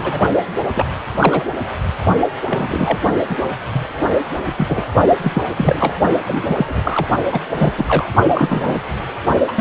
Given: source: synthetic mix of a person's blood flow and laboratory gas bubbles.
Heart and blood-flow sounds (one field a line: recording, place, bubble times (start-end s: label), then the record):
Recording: Doppler ultrasound of blood flow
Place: precordium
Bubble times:
0.00-0.27 s: bubbles
0.75-0.85 s: bubbles
1.21-1.44 s: bubbles
2.50-2.99 s: bubbles
3.29-3.37 s: bubbles
3.73-3.88 s: bubbles
4.57-4.86 s: bubbles
5.21-5.42 s: bubbles
5.57-5.95 s: bubbles
6.26-6.42 s: bubbles
6.46-7.07 s: bubbles
7.32-7.41 s: bubbles
7.58-7.73 s: bubbles
7.78-8.09 s: bubbles
8.35-8.80 s: bubbles
9.47-9.51 s: bubbles
9.56-9.61 s: bubbles
From the record:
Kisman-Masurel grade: 242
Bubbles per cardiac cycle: several, 3 to 8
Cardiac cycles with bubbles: 100%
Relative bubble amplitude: moderate (0.250 to 0.450)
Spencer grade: 3 (all of the cardiac periods contain showers or single bubble signals, but not dominating or overriding the cardiac motion signals)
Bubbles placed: only in the low amplitude regions of the cardiac cycle